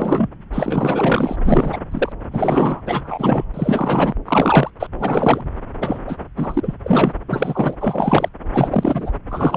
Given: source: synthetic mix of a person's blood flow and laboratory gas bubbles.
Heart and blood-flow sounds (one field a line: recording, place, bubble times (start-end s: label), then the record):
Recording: Doppler ultrasound of blood flow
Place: subclavian vein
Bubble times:
0.00-0.30 s: bubbles
0.53-1.36 s: bubbles
1.44-1.77 s: bubbles
1.91-2.12 s: bubbles
2.30-2.81 s: bubbles
2.85-3.44 s: bubbles
3.53-4.13 s: bubbles
4.25-4.71 s: bubbles
4.79-4.87 s: bubbles
4.99-5.43 s: bubbles
5.80-5.99 s: bubbles
6.06-6.17 s: bubbles
6.37-6.74 s: bubbles
6.83-7.12 s: bubbles
7.28-7.77 s: bubbles
7.80-8.29 s: bubbles
8.53-9.11 s: bubbles
9.30-9.57 s: bubbles
From the record:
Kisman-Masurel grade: 343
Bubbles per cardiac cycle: rolling drumbeat, 9 or more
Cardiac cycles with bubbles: 100%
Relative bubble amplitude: loud (0.450 to 0.775)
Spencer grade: 3 (all of the cardiac periods contain showers or single bubble signals, but not dominating or overriding the cardiac motion signals)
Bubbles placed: anywhere in the cardiac cycle